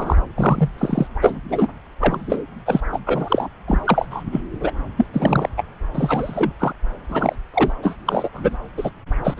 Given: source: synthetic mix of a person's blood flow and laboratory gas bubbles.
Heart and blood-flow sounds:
Doppler ultrasound of blood flow; subclavian vein
0.00-0.22 s: bubbles
0.38-0.69 s: bubbles
0.78-1.07 s: bubbles
1.21-1.38 s: bubbles
1.49-1.67 s: bubbles
2.00-2.42 s: bubbles
2.65-2.80 s: bubbles
2.92-3.00 s: bubbles
3.06-3.48 s: bubbles
3.67-4.06 s: bubbles
4.11-4.24 s: bubbles
4.32-4.43 s: bubbles
4.60-4.72 s: bubbles
4.97-5.06 s: bubbles
5.12-5.49 s: bubbles
5.57-5.64 s: bubbles
5.95-6.51 s: bubbles
6.59-6.73 s: bubbles
7.09-7.36 s: bubbles
7.54-7.73 s: bubbles
7.83-7.97 s: bubbles
8.06-8.29 s: bubbles
8.33-8.55 s: bubbles
8.77-8.90 s: bubbles
9.23-9.34 s: bubbles
9.37-9.40 s: bubbles
From the record:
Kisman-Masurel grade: 343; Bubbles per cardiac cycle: rolling drumbeat, 9 or more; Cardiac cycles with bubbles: 100%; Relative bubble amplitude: loud (0.450 to 0.775); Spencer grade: 3 (all of the cardiac periods contain showers or single bubble signals, but not dominating or overriding the cardiac motion signals); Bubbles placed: anywhere in the cardiac cycle

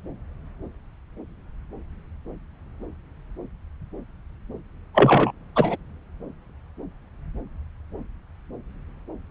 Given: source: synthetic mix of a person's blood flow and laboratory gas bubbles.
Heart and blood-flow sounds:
Doppler ultrasound of blood flow; subclavian vein
4.95-5.32 s: bubbles
5.55-5.76 s: bubbles
From the record:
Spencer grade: 1 (occasional bubble signal discernible with the cardiac motion signal, with majority of cardiac periods free of bubbles); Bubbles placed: anywhere in the cardiac cycle

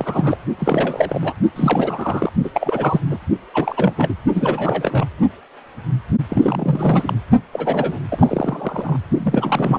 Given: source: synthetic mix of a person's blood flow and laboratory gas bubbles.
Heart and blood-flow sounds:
Doppler ultrasound of blood flow; precordium
0.00-0.37 s: bubbles
0.58-1.33 s: bubbles
1.56-2.32 s: bubbles
2.44-2.50 s: bubbles
2.54-3.00 s: bubbles
3.08-3.18 s: bubbles
3.54-3.94 s: bubbles
3.96-4.15 s: bubbles
4.34-5.06 s: bubbles
6.29-7.15 s: bubbles
7.53-7.99 s: bubbles
8.09-8.96 s: bubbles
9.17-9.79 s: bubbles
From the record:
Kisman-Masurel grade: 332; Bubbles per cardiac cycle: rolling drumbeat, 9 or more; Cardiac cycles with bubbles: 50 to 99%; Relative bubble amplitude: moderate (0.250 to 0.450); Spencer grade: 3 (all of the cardiac periods contain showers or single bubble signals, but not dominating or overriding the cardiac motion signals); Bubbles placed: only in the low amplitude regions of the cardiac cycle

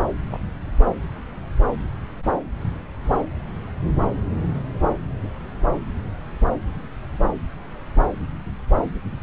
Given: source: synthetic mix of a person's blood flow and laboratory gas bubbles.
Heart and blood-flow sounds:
Doppler ultrasound of blood flow; subclavian vein
0.32-0.37 s: bubbles
From the record:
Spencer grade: 2 (many but less than half of the cardiac periods contain bubble signals, singularly or in groups); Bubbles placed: anywhere in the cardiac cycle

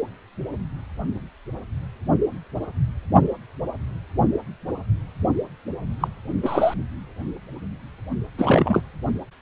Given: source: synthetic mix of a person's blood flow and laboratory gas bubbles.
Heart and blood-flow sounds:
Doppler ultrasound of blood flow; precordium
6.00-6.08 s: bubbles
6.42-6.74 s: bubbles
8.38-8.81 s: bubbles
From the record:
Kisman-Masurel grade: 222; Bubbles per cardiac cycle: several, 3 to 8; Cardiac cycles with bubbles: 10 to 50%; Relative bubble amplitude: moderate (0.250 to 0.450); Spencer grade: 2 (many but less than half of the cardiac periods contain bubble signals, singularly or in groups); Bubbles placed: only in the low amplitude regions of the cardiac cycle

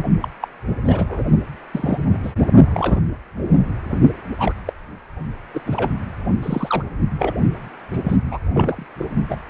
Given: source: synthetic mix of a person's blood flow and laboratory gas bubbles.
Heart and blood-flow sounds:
Doppler ultrasound of blood flow; precordium
0.21-0.28 s: bubbles
0.42-0.47 s: bubbles
0.85-1.23 s: bubbles
1.72-1.98 s: bubbles
2.12-2.18 s: bubbles
2.23-2.32 s: bubbles
2.74-3.00 s: bubbles
4.38-4.53 s: bubbles
4.67-4.73 s: bubbles
5.54-5.61 s: bubbles
5.67-5.91 s: bubbles
6.42-6.84 s: bubbles
7.19-7.33 s: bubbles
7.91-8.17 s: bubbles
8.31-8.39 s: bubbles
8.53-8.87 s: bubbles
8.98-9.05 s: bubbles
9.28-9.38 s: bubbles
From the record:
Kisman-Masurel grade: 242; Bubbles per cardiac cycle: several, 3 to 8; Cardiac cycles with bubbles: 100%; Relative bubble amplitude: moderate (0.250 to 0.450); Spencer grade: 3 (all of the cardiac periods contain showers or single bubble signals, but not dominating or overriding the cardiac motion signals); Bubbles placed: only in the low amplitude regions of the cardiac cycle

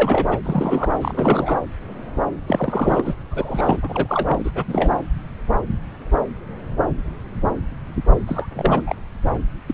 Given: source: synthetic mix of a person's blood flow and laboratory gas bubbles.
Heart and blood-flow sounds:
Doppler ultrasound of blood flow; subclavian vein
0.00-0.26 s: bubbles
0.29-0.38 s: bubbles
0.45-0.97 s: bubbles
1.01-1.59 s: bubbles
2.47-3.14 s: bubbles
3.31-4.50 s: bubbles
4.55-4.63 s: bubbles
4.67-4.96 s: bubbles
8.27-8.48 s: bubbles
8.54-8.83 s: bubbles
8.87-8.96 s: bubbles
9.67-9.74 s: bubbles
From the record:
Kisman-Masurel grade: 332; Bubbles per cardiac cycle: rolling drumbeat, 9 or more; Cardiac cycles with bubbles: 50 to 99%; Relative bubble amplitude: moderate (0.250 to 0.450); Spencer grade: 3 (all of the cardiac periods contain showers or single bubble signals, but not dominating or overriding the cardiac motion signals); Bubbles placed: anywhere in the cardiac cycle

